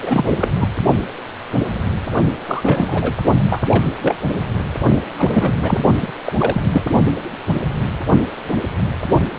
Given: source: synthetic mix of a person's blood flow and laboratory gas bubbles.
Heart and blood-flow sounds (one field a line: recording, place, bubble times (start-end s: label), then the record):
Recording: Doppler ultrasound of blood flow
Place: precordium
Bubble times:
0.02-0.49 s: bubbles
0.58-0.69 s: bubbles
2.47-3.14 s: bubbles
3.48-3.62 s: bubbles
3.70-3.83 s: bubbles
4.01-4.15 s: bubbles
5.18-5.83 s: bubbles
5.95-6.11 s: bubbles
6.25-6.33 s: bubbles
6.38-6.62 s: bubbles
6.72-6.83 s: bubbles
From the record:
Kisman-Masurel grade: 232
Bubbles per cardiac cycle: several, 3 to 8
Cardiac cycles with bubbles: 50 to 99%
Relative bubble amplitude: moderate (0.250 to 0.450)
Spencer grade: 3 (all of the cardiac periods contain showers or single bubble signals, but not dominating or overriding the cardiac motion signals)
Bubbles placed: only in the low amplitude regions of the cardiac cycle